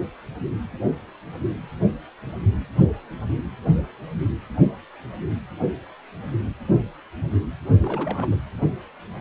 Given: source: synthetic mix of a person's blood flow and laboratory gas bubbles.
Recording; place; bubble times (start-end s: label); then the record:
Doppler ultrasound of blood flow; precordium
7.82-8.39 s: bubbles
From the record:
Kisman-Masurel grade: 211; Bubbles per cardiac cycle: several, 3 to 8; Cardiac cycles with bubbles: 1 to 10%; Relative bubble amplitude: barely perceptible (0.100 to 0.250); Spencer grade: 1 (occasional bubble signal discernible with the cardiac motion signal, with majority of cardiac periods free of bubbles); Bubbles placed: only in the low amplitude regions of the cardiac cycle